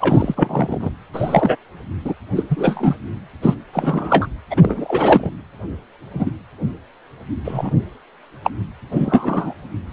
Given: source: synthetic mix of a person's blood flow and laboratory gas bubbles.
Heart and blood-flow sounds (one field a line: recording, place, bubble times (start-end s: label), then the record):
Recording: Doppler ultrasound of blood flow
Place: precordium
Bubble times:
0.00-0.90 s: bubbles
1.13-1.56 s: bubbles
2.05-2.15 s: bubbles
2.35-2.46 s: bubbles
2.50-2.97 s: bubbles
3.42-3.56 s: bubbles
3.73-4.26 s: bubbles
4.50-5.31 s: bubbles
6.13-6.30 s: bubbles
7.44-7.71 s: bubbles
8.44-8.51 s: bubbles
8.91-9.54 s: bubbles
From the record:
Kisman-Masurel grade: 243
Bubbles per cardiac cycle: several, 3 to 8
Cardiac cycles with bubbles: 100%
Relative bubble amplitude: loud (0.450 to 0.775)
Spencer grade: 3 (all of the cardiac periods contain showers or single bubble signals, but not dominating or overriding the cardiac motion signals)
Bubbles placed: anywhere in the cardiac cycle